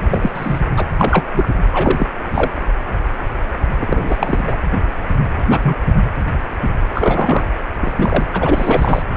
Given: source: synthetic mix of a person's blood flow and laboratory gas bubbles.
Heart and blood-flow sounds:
Doppler ultrasound of blood flow; precordium
0.10-0.32 s: bubbles
0.34-0.60 s: bubbles
0.76-0.85 s: bubbles
0.98-1.25 s: bubbles
1.32-1.53 s: bubbles
1.72-2.07 s: bubbles
2.33-2.51 s: bubbles
3.80-4.42 s: bubbles
4.47-4.57 s: bubbles
5.49-5.59 s: bubbles
5.63-5.78 s: bubbles
6.94-7.48 s: bubbles
7.82-8.28 s: bubbles
8.33-9.02 s: bubbles
From the record:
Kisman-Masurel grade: 233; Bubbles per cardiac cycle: several, 3 to 8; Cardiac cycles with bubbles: 50 to 99%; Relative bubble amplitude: loud (0.450 to 0.775); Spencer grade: 3 (all of the cardiac periods contain showers or single bubble signals, but not dominating or overriding the cardiac motion signals); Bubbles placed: anywhere in the cardiac cycle

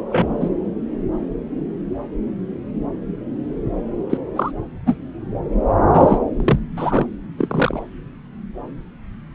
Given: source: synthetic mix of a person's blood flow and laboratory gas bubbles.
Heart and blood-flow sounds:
Doppler ultrasound of blood flow; subclavian vein
0.10-0.49 s: bubbles
4.09-4.17 s: bubbles
4.35-4.51 s: bubbles
4.85-4.96 s: bubbles
5.88-6.18 s: bubbles
6.40-6.59 s: bubbles
6.76-7.06 s: bubbles
7.38-7.83 s: bubbles
From the record:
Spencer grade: 3 (all of the cardiac periods contain showers or single bubble signals, but not dominating or overriding the cardiac motion signals); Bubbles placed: anywhere in the cardiac cycle

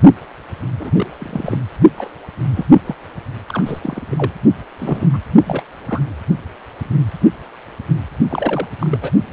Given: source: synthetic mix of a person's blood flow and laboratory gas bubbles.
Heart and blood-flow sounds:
Doppler ultrasound of blood flow; precordium
0.80-1.06 s: bubbles
1.19-1.59 s: bubbles
1.97-2.10 s: bubbles
2.54-2.67 s: bubbles
2.73-2.81 s: bubbles
2.85-2.95 s: bubbles
3.48-3.62 s: bubbles
3.66-4.02 s: bubbles
4.06-4.33 s: bubbles
4.79-5.08 s: bubbles
5.13-5.18 s: bubbles
5.46-5.62 s: bubbles
5.88-6.01 s: bubbles
8.30-8.68 s: bubbles
8.79-8.98 s: bubbles
9.02-9.11 s: bubbles
From the record:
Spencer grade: 3 (all of the cardiac periods contain showers or single bubble signals, but not dominating or overriding the cardiac motion signals); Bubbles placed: only in the low amplitude regions of the cardiac cycle

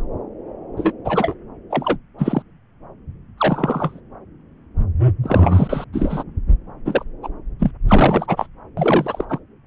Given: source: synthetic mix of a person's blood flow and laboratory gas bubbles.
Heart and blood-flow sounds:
Doppler ultrasound of blood flow; subclavian vein
0.77-0.92 s: bubbles
1.04-1.34 s: bubbles
1.70-1.97 s: bubbles
2.18-2.43 s: bubbles
3.37-4.00 s: bubbles
5.23-5.84 s: bubbles
5.92-6.24 s: bubbles
6.85-7.04 s: bubbles
7.23-7.28 s: bubbles
7.59-7.71 s: bubbles
7.88-8.46 s: bubbles
8.77-9.25 s: bubbles
9.29-9.39 s: bubbles
From the record:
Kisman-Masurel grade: 233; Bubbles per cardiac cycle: several, 3 to 8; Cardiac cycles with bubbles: 50 to 99%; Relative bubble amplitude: loud (0.450 to 0.775); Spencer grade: 3 (all of the cardiac periods contain showers or single bubble signals, but not dominating or overriding the cardiac motion signals); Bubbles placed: anywhere in the cardiac cycle

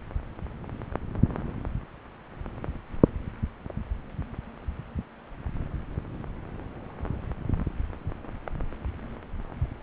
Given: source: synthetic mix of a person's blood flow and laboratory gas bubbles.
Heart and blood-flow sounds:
Doppler ultrasound of blood flow; subclavian vein
no bubbles
From the record:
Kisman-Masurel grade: 000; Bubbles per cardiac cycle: 0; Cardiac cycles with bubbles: 0%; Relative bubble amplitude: no bubbles discernible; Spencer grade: 0 (complete lack of bubble signals)

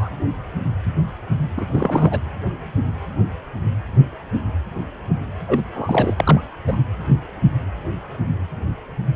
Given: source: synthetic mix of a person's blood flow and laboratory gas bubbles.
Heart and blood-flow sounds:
Doppler ultrasound of blood flow; precordium
0.00-0.09 s: bubbles
1.57-1.65 s: bubbles
1.72-2.20 s: bubbles
5.47-5.62 s: bubbles
5.74-6.14 s: bubbles
6.17-6.41 s: bubbles
6.67-6.77 s: bubbles
From the record:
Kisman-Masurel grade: 222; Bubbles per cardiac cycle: several, 3 to 8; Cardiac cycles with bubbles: 10 to 50%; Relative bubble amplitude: moderate (0.250 to 0.450); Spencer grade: 2 (many but less than half of the cardiac periods contain bubble signals, singularly or in groups); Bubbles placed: anywhere in the cardiac cycle

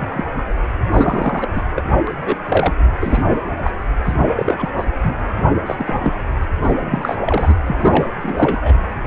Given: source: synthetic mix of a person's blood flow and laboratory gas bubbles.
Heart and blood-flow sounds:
Doppler ultrasound of blood flow; precordium
0.00-0.24 s: bubbles
0.38-0.43 s: bubbles
0.92-1.50 s: bubbles
1.55-1.61 s: bubbles
1.74-1.84 s: bubbles
2.07-2.38 s: bubbles
2.48-2.74 s: bubbles
3.00-3.24 s: bubbles
3.63-3.71 s: bubbles
4.04-4.15 s: bubbles
4.37-4.70 s: bubbles
4.78-4.86 s: bubbles
5.02-5.17 s: bubbles
5.66-5.75 s: bubbles
5.79-6.13 s: bubbles
6.62-7.17 s: bubbles
7.25-7.54 s: bubbles
7.67-8.14 s: bubbles
8.21-8.75 s: bubbles
From the record:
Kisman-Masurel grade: 243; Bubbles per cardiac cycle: several, 3 to 8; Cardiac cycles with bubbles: 100%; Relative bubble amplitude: loud (0.450 to 0.775); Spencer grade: 3 (all of the cardiac periods contain showers or single bubble signals, but not dominating or overriding the cardiac motion signals); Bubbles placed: anywhere in the cardiac cycle

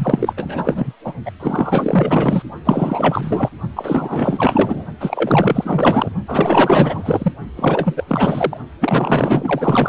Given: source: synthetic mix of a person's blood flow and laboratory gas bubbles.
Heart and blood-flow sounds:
Doppler ultrasound of blood flow; precordium
0.00-0.33 s: bubbles
0.37-0.93 s: bubbles
1.04-1.14 s: bubbles
1.25-1.31 s: bubbles
1.40-2.43 s: bubbles
2.65-3.50 s: bubbles
3.76-4.86 s: bubbles
5.00-6.10 s: bubbles
6.27-7.32 s: bubbles
7.57-8.04 s: bubbles
8.07-8.57 s: bubbles
8.81-9.89 s: bubbles
From the record:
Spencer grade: 4 (maximum detectable bubble signal sounding continuously throughout systole and diastole of every cardiac period, and overriding the amplitude of the normal cardiac signals); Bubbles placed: only in the low amplitude regions of the cardiac cycle

